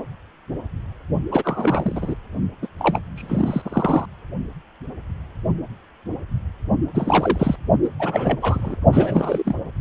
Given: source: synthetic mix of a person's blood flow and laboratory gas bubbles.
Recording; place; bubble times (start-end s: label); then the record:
Doppler ultrasound of blood flow; precordium
1.31-2.15 s: bubbles
2.62-2.68 s: bubbles
2.79-3.00 s: bubbles
3.16-4.05 s: bubbles
6.94-7.56 s: bubbles
7.84-7.89 s: bubbles
7.99-8.39 s: bubbles
8.41-8.76 s: bubbles
8.92-9.42 s: bubbles
9.45-9.56 s: bubbles
From the record:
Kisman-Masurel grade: 332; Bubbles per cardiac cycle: rolling drumbeat, 9 or more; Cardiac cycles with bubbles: 50 to 99%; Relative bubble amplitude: moderate (0.250 to 0.450); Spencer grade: 3 (all of the cardiac periods contain showers or single bubble signals, but not dominating or overriding the cardiac motion signals); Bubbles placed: only in the low amplitude regions of the cardiac cycle